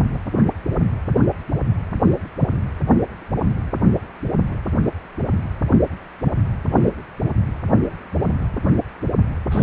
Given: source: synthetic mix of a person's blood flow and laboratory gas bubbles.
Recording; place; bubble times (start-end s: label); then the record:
Doppler ultrasound of blood flow; precordium
6.77-6.91 s: bubbles
9.51-9.63 s: bubbles
From the record:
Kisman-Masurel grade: 123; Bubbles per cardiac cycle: 1 to 2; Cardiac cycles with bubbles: 10 to 50%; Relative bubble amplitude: loud (0.450 to 0.775); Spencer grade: 2 (many but less than half of the cardiac periods contain bubble signals, singularly or in groups); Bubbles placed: anywhere in the cardiac cycle